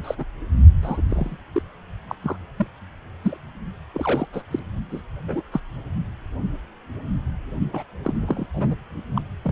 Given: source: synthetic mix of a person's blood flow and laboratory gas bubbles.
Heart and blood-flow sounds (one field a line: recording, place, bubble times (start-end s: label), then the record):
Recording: Doppler ultrasound of blood flow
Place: precordium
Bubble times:
0.04-0.15 s: bubbles
0.17-0.24 s: bubbles
0.82-1.02 s: bubbles
1.08-1.38 s: bubbles
1.54-1.62 s: bubbles
2.08-2.15 s: bubbles
2.22-2.36 s: bubbles
2.57-2.67 s: bubbles
3.23-3.38 s: bubbles
3.94-4.27 s: bubbles
4.33-4.43 s: bubbles
4.50-4.59 s: bubbles
4.91-5.02 s: bubbles
5.28-5.43 s: bubbles
5.52-5.60 s: bubbles
7.73-7.83 s: bubbles
8.03-8.46 s: bubbles
8.53-8.76 s: bubbles
9.15-9.21 s: bubbles
9.44-9.52 s: bubbles
From the record:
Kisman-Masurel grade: 232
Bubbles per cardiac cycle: several, 3 to 8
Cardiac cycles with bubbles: 50 to 99%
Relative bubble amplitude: moderate (0.250 to 0.450)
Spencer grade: 3 (all of the cardiac periods contain showers or single bubble signals, but not dominating or overriding the cardiac motion signals)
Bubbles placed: only in the low amplitude regions of the cardiac cycle